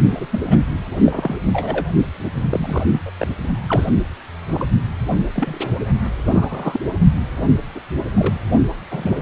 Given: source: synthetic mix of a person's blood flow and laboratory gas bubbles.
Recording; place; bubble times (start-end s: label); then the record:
Doppler ultrasound of blood flow; precordium
0.13-0.26 s: bubbles
0.32-0.40 s: bubbles
0.47-0.58 s: bubbles
1.03-1.35 s: bubbles
1.53-1.86 s: bubbles
2.42-2.85 s: bubbles
2.92-3.03 s: bubbles
3.05-3.11 s: bubbles
3.18-3.27 s: bubbles
3.67-3.89 s: bubbles
4.48-4.67 s: bubbles
5.34-5.68 s: bubbles
6.24-6.80 s: bubbles
7.75-7.80 s: bubbles
8.14-8.35 s: bubbles
8.91-9.22 s: bubbles
From the record:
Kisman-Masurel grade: 242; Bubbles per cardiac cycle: several, 3 to 8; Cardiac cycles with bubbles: 100%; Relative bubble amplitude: moderate (0.250 to 0.450); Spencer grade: 3 (all of the cardiac periods contain showers or single bubble signals, but not dominating or overriding the cardiac motion signals); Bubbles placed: only in the low amplitude regions of the cardiac cycle